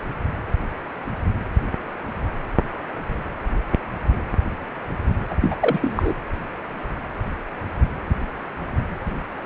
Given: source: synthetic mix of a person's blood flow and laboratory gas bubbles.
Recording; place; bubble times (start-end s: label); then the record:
Doppler ultrasound of blood flow; precordium
5.30-5.35 s: bubbles
5.42-5.55 s: bubbles
5.60-6.13 s: bubbles
From the record:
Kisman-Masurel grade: 212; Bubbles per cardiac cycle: several, 3 to 8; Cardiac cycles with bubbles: 1 to 10%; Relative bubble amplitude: moderate (0.250 to 0.450); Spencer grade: 1 (occasional bubble signal discernible with the cardiac motion signal, with majority of cardiac periods free of bubbles); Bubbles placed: anywhere in the cardiac cycle